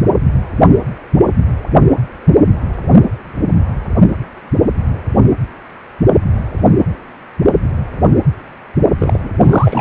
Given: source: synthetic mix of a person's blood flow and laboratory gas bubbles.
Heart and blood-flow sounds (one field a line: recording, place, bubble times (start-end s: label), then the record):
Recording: Doppler ultrasound of blood flow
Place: precordium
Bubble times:
8.98-9.29 s: bubbles
9.43-9.81 s: bubbles
From the record:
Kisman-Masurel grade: 212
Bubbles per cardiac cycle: several, 3 to 8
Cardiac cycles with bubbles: 1 to 10%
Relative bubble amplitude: moderate (0.250 to 0.450)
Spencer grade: 1 (occasional bubble signal discernible with the cardiac motion signal, with majority of cardiac periods free of bubbles)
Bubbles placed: only in the low amplitude regions of the cardiac cycle